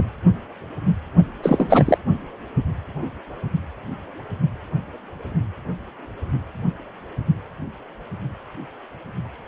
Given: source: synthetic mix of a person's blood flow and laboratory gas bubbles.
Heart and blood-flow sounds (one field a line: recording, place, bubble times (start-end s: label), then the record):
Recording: Doppler ultrasound of blood flow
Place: precordium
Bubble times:
1.42-1.98 s: bubbles
From the record:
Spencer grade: 1 (occasional bubble signal discernible with the cardiac motion signal, with majority of cardiac periods free of bubbles)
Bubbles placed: only in the low amplitude regions of the cardiac cycle